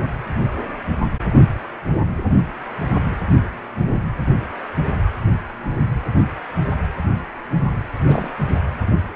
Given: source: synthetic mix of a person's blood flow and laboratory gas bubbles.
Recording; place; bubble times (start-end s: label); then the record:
Doppler ultrasound of blood flow; precordium
8.05-8.34 s: bubbles
From the record:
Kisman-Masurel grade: 211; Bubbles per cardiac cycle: several, 3 to 8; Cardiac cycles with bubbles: 1 to 10%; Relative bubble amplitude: barely perceptible (0.100 to 0.250); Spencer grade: 1 (occasional bubble signal discernible with the cardiac motion signal, with majority of cardiac periods free of bubbles); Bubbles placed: anywhere in the cardiac cycle